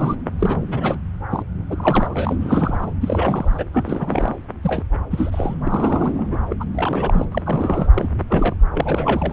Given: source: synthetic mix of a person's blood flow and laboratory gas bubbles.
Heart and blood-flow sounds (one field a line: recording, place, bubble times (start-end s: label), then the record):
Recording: Doppler ultrasound of blood flow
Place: subclavian vein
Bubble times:
0.00-0.16 s: bubbles
0.39-0.56 s: bubbles
0.68-0.97 s: bubbles
1.30-1.43 s: bubbles
1.70-2.36 s: bubbles
2.41-2.92 s: bubbles
3.00-3.64 s: bubbles
3.74-4.36 s: bubbles
4.63-4.83 s: bubbles
5.10-5.56 s: bubbles
5.64-6.38 s: bubbles
6.50-6.54 s: bubbles
6.60-6.65 s: bubbles
6.75-7.25 s: bubbles
7.31-7.42 s: bubbles
7.45-7.88 s: bubbles
7.94-8.09 s: bubbles
8.13-8.23 s: bubbles
8.28-8.56 s: bubbles
8.74-9.33 s: bubbles
From the record:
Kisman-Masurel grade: 342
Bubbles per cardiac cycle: rolling drumbeat, 9 or more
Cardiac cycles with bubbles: 100%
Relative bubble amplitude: moderate (0.250 to 0.450)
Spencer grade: 3 (all of the cardiac periods contain showers or single bubble signals, but not dominating or overriding the cardiac motion signals)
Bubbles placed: anywhere in the cardiac cycle